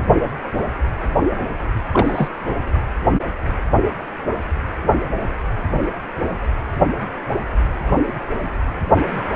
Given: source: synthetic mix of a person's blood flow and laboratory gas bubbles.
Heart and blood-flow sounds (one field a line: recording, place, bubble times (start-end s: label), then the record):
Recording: Doppler ultrasound of blood flow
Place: precordium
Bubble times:
1.92-2.28 s: bubbles
From the record:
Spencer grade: 1 (occasional bubble signal discernible with the cardiac motion signal, with majority of cardiac periods free of bubbles)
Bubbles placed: anywhere in the cardiac cycle